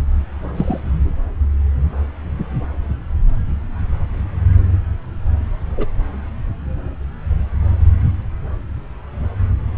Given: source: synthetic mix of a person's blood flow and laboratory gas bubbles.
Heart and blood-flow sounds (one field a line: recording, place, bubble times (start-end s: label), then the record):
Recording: Doppler ultrasound of blood flow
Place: subclavian vein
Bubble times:
0.56-0.80 s: bubbles
5.77-5.86 s: bubbles
From the record:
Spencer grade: 1 (occasional bubble signal discernible with the cardiac motion signal, with majority of cardiac periods free of bubbles)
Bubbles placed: anywhere in the cardiac cycle